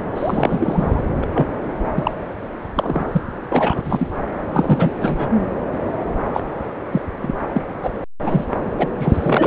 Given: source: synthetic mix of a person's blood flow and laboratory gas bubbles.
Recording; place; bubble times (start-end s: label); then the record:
Doppler ultrasound of blood flow; subclavian vein
0.14-1.02 s: bubbles
1.22-1.24 s: bubbles
1.34-1.47 s: bubbles
1.94-2.11 s: bubbles
2.75-3.06 s: bubbles
3.12-3.22 s: bubbles
3.50-4.08 s: bubbles
4.53-4.92 s: bubbles
5.00-5.31 s: bubbles
6.33-6.40 s: bubbles
6.91-7.02 s: bubbles
7.21-7.35 s: bubbles
7.54-7.64 s: bubbles
7.83-7.91 s: bubbles
8.25-8.45 s: bubbles
8.78-8.87 s: bubbles
8.99-9.47 s: bubbles
From the record:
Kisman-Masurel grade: 243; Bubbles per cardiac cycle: several, 3 to 8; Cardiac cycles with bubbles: 100%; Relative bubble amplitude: loud (0.450 to 0.775); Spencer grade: 3 (all of the cardiac periods contain showers or single bubble signals, but not dominating or overriding the cardiac motion signals); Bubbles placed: anywhere in the cardiac cycle